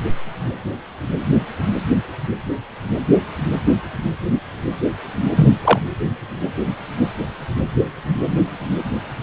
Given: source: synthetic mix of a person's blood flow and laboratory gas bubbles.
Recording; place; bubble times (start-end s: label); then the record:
Doppler ultrasound of blood flow; precordium
5.36-5.59 s: bubbles
5.64-5.79 s: bubbles
From the record:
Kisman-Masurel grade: 213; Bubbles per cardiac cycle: several, 3 to 8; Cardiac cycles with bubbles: 1 to 10%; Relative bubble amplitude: loud (0.450 to 0.775); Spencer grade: 1 (occasional bubble signal discernible with the cardiac motion signal, with majority of cardiac periods free of bubbles); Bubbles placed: anywhere in the cardiac cycle